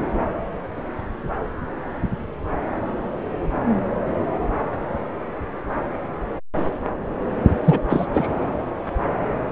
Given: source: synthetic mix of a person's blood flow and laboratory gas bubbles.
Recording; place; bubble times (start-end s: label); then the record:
Doppler ultrasound of blood flow; subclavian vein
7.64-7.79 s: bubbles
7.90-8.06 s: bubbles
8.14-8.28 s: bubbles
From the record:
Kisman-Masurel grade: 213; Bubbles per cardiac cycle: several, 3 to 8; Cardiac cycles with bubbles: 1 to 10%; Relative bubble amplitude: loud (0.450 to 0.775); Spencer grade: 1 (occasional bubble signal discernible with the cardiac motion signal, with majority of cardiac periods free of bubbles); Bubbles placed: anywhere in the cardiac cycle